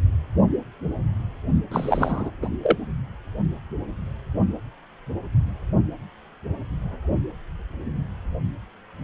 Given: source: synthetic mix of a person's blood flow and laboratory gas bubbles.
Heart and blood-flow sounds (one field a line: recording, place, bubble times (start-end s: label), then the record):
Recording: Doppler ultrasound of blood flow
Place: precordium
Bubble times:
1.71-2.31 s: bubbles
2.42-2.49 s: bubbles
2.62-2.76 s: bubbles
From the record:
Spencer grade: 1 (occasional bubble signal discernible with the cardiac motion signal, with majority of cardiac periods free of bubbles)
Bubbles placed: only in the low amplitude regions of the cardiac cycle